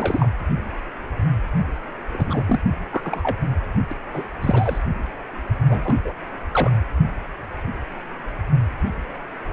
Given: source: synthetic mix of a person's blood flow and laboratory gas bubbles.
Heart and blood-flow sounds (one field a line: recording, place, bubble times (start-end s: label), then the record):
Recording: Doppler ultrasound of blood flow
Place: precordium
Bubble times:
0.00-0.30 s: bubbles
2.12-2.44 s: bubbles
2.47-2.59 s: bubbles
2.90-3.37 s: bubbles
3.91-3.94 s: bubbles
4.13-4.24 s: bubbles
4.42-4.79 s: bubbles
5.68-5.96 s: bubbles
6.04-6.14 s: bubbles
6.52-6.72 s: bubbles
From the record:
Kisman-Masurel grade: 232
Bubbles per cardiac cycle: several, 3 to 8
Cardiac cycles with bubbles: 50 to 99%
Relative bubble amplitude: moderate (0.250 to 0.450)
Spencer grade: 3 (all of the cardiac periods contain showers or single bubble signals, but not dominating or overriding the cardiac motion signals)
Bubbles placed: anywhere in the cardiac cycle